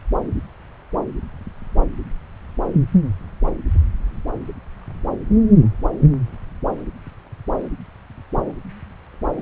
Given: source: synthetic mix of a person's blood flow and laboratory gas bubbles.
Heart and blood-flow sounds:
Doppler ultrasound of blood flow; subclavian vein
no bubbles
From the record:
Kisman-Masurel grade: 000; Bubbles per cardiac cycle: 0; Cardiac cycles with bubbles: 0%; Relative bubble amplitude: no bubbles discernible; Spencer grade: 0 (complete lack of bubble signals)

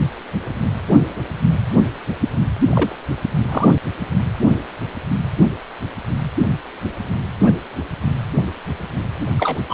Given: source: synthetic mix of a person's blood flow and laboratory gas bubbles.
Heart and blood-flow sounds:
Doppler ultrasound of blood flow; precordium
2.69-2.96 s: bubbles
3.49-3.74 s: bubbles
7.39-7.52 s: bubbles
9.38-9.59 s: bubbles
9.69-9.74 s: bubbles
From the record:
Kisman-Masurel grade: 122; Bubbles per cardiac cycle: 1 to 2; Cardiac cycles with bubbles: 10 to 50%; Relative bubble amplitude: moderate (0.250 to 0.450); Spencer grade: 2 (many but less than half of the cardiac periods contain bubble signals, singularly or in groups); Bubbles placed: anywhere in the cardiac cycle

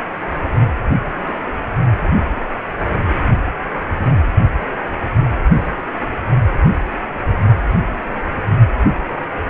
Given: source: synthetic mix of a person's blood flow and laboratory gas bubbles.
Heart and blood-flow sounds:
Doppler ultrasound of blood flow; precordium
no bubbles
From the record:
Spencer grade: 0 (complete lack of bubble signals)

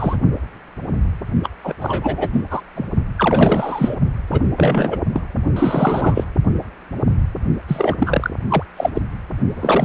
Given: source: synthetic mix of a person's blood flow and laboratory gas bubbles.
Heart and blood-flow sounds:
Doppler ultrasound of blood flow; precordium
0.00-0.16 s: bubbles
1.43-1.49 s: bubbles
1.64-1.74 s: bubbles
1.80-2.31 s: bubbles
2.34-2.43 s: bubbles
2.50-2.62 s: bubbles
2.75-2.88 s: bubbles
3.17-3.97 s: bubbles
4.32-4.40 s: bubbles
4.57-4.99 s: bubbles
5.13-5.21 s: bubbles
5.56-6.24 s: bubbles
7.67-8.30 s: bubbles
8.48-8.63 s: bubbles
8.77-8.90 s: bubbles
8.95-9.02 s: bubbles
9.55-9.85 s: bubbles
From the record:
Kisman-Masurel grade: 333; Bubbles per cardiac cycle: rolling drumbeat, 9 or more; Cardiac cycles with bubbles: 50 to 99%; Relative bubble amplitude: loud (0.450 to 0.775); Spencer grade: 3 (all of the cardiac periods contain showers or single bubble signals, but not dominating or overriding the cardiac motion signals); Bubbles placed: only in the low amplitude regions of the cardiac cycle

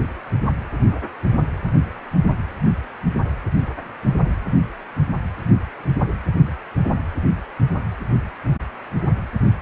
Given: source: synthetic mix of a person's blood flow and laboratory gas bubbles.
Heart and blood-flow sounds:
Doppler ultrasound of blood flow; precordium
no bubbles
From the record:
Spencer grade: 0 (complete lack of bubble signals)

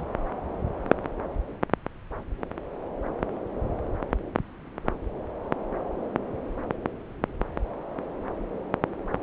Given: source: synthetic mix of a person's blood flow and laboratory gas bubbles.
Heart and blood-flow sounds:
Doppler ultrasound of blood flow; subclavian vein
0.00-0.04 s: bubbles
From the record:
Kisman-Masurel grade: 212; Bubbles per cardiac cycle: several, 3 to 8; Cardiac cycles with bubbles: 1 to 10%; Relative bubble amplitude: moderate (0.250 to 0.450); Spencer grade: 1 (occasional bubble signal discernible with the cardiac motion signal, with majority of cardiac periods free of bubbles); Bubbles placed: anywhere in the cardiac cycle

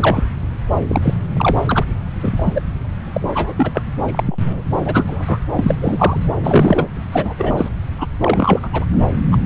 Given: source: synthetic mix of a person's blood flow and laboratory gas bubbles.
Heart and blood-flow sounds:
Doppler ultrasound of blood flow; subclavian vein
0.00-0.24 s: bubbles
0.89-1.14 s: bubbles
1.36-1.57 s: bubbles
1.66-1.84 s: bubbles
2.21-2.62 s: bubbles
3.12-3.21 s: bubbles
3.35-3.83 s: bubbles
4.00-4.38 s: bubbles
4.45-4.62 s: bubbles
4.85-5.38 s: bubbles
5.54-5.75 s: bubbles
5.81-6.17 s: bubbles
6.40-6.87 s: bubbles
7.12-7.34 s: bubbles
7.38-7.68 s: bubbles
7.97-8.07 s: bubbles
8.20-8.69 s: bubbles
8.72-8.85 s: bubbles
8.92-8.98 s: bubbles
9.31-9.38 s: bubbles
From the record:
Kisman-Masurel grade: 243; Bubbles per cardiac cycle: several, 3 to 8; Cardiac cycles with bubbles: 100%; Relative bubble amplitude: loud (0.450 to 0.775); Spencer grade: 3 (all of the cardiac periods contain showers or single bubble signals, but not dominating or overriding the cardiac motion signals); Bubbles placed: anywhere in the cardiac cycle

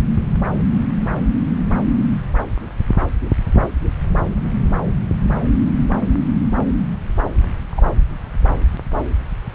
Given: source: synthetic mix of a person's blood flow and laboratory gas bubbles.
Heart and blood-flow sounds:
Doppler ultrasound of blood flow; subclavian vein
3.56-3.65 s: bubbles
7.69-7.83 s: bubbles
From the record:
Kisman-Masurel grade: 121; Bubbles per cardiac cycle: 1 to 2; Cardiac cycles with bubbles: 10 to 50%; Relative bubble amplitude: barely perceptible (0.100 to 0.250); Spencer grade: 2 (many but less than half of the cardiac periods contain bubble signals, singularly or in groups); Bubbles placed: anywhere in the cardiac cycle

